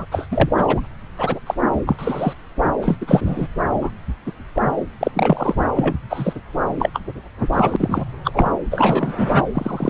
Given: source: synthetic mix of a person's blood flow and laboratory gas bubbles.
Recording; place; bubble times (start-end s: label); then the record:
Doppler ultrasound of blood flow; subclavian vein
0.00-0.05 s: bubbles
0.11-0.27 s: bubbles
0.31-0.49 s: bubbles
0.57-0.81 s: bubbles
1.17-1.40 s: bubbles
1.46-1.54 s: bubbles
1.86-1.96 s: bubbles
1.99-2.33 s: bubbles
2.81-2.97 s: bubbles
3.01-3.22 s: bubbles
3.25-3.47 s: bubbles
3.81-3.90 s: bubbles
4.26-4.32 s: bubbles
4.55-4.62 s: bubbles
5.00-5.11 s: bubbles
5.13-5.55 s: bubbles
5.75-5.96 s: bubbles
6.09-6.33 s: bubbles
6.79-6.90 s: bubbles
6.94-7.00 s: bubbles
7.53-7.77 s: bubbles
7.79-8.04 s: bubbles
8.23-8.50 s: bubbles
8.71-9.13 s: bubbles
9.18-9.43 s: bubbles
9.54-9.89 s: bubbles
From the record:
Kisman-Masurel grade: 233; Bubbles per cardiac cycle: several, 3 to 8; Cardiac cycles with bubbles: 50 to 99%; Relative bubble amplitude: loud (0.450 to 0.775); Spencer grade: 3 (all of the cardiac periods contain showers or single bubble signals, but not dominating or overriding the cardiac motion signals); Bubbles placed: anywhere in the cardiac cycle